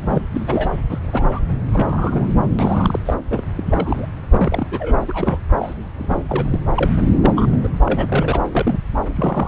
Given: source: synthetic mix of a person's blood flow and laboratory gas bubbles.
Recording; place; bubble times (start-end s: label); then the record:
Doppler ultrasound of blood flow; subclavian vein
0.01-0.21 s: bubbles
0.35-0.71 s: bubbles
0.89-0.99 s: bubbles
1.03-1.26 s: bubbles
1.30-1.40 s: bubbles
1.72-2.31 s: bubbles
2.58-3.00 s: bubbles
3.05-3.18 s: bubbles
3.30-3.42 s: bubbles
3.57-4.06 s: bubbles
4.30-4.67 s: bubbles
4.71-4.92 s: bubbles
5.01-5.05 s: bubbles
5.08-5.39 s: bubbles
5.60-5.75 s: bubbles
5.99-6.23 s: bubbles
6.29-6.59 s: bubbles
6.75-6.91 s: bubbles
7.14-7.33 s: bubbles
7.35-7.68 s: bubbles
7.85-8.06 s: bubbles
8.12-8.43 s: bubbles
8.52-8.78 s: bubbles
9.16-9.48 s: bubbles
From the record:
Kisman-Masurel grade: 242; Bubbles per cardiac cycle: several, 3 to 8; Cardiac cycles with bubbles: 100%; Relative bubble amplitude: moderate (0.250 to 0.450); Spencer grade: 3 (all of the cardiac periods contain showers or single bubble signals, but not dominating or overriding the cardiac motion signals); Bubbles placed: anywhere in the cardiac cycle